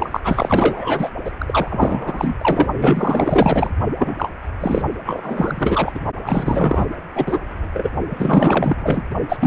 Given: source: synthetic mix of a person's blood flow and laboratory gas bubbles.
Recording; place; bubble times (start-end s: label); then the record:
Doppler ultrasound of blood flow; precordium
0.00-0.21 s: bubbles
0.23-1.09 s: bubbles
1.25-1.31 s: bubbles
1.38-2.35 s: bubbles
2.41-2.67 s: bubbles
2.74-3.70 s: bubbles
3.98-4.31 s: bubbles
4.60-4.83 s: bubbles
5.05-6.00 s: bubbles
6.24-6.86 s: bubbles
7.15-7.40 s: bubbles
7.50-7.91 s: bubbles
8.10-9.03 s: bubbles
9.29-9.37 s: bubbles
9.40-9.47 s: bubbles
From the record:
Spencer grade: 4 (maximum detectable bubble signal sounding continuously throughout systole and diastole of every cardiac period, and overriding the amplitude of the normal cardiac signals); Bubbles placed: only in the low amplitude regions of the cardiac cycle